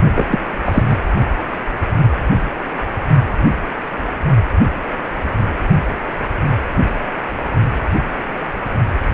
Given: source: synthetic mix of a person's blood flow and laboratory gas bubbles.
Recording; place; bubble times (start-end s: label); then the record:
Doppler ultrasound of blood flow; precordium
0.15-0.25 s: bubbles
0.30-0.38 s: bubbles
0.65-0.83 s: bubbles
0.89-0.99 s: bubbles
From the record:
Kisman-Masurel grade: 223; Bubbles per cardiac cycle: several, 3 to 8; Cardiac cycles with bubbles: 10 to 50%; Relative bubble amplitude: loud (0.450 to 0.775); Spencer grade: 2 (many but less than half of the cardiac periods contain bubble signals, singularly or in groups); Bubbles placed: only in the low amplitude regions of the cardiac cycle